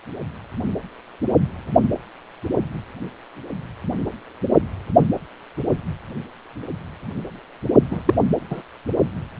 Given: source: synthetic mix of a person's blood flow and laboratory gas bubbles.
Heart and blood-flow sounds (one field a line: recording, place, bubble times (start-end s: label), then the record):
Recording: Doppler ultrasound of blood flow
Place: precordium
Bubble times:
7.91-8.03 s: bubbles
8.05-8.14 s: bubbles
8.49-8.62 s: bubbles
From the record:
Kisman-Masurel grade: 213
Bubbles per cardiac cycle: several, 3 to 8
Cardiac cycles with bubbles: 1 to 10%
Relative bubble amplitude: loud (0.450 to 0.775)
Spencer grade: 1 (occasional bubble signal discernible with the cardiac motion signal, with majority of cardiac periods free of bubbles)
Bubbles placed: only in the low amplitude regions of the cardiac cycle